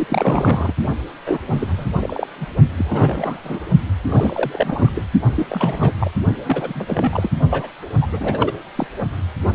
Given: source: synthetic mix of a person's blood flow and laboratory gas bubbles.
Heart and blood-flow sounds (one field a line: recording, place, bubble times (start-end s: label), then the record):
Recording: Doppler ultrasound of blood flow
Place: precordium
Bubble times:
0.00-0.73 s: bubbles
1.26-1.39 s: bubbles
1.46-1.85 s: bubbles
2.00-2.27 s: bubbles
2.40-2.46 s: bubbles
2.77-3.59 s: bubbles
4.08-4.92 s: bubbles
4.95-5.04 s: bubbles
5.36-5.46 s: bubbles
5.50-5.93 s: bubbles
6.00-6.11 s: bubbles
6.45-7.29 s: bubbles
7.50-7.70 s: bubbles
8.01-8.08 s: bubbles
8.12-8.52 s: bubbles
8.76-8.87 s: bubbles
From the record:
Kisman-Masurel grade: 332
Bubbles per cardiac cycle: rolling drumbeat, 9 or more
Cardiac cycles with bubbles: 50 to 99%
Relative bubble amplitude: moderate (0.250 to 0.450)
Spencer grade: 3 (all of the cardiac periods contain showers or single bubble signals, but not dominating or overriding the cardiac motion signals)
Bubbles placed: only in the low amplitude regions of the cardiac cycle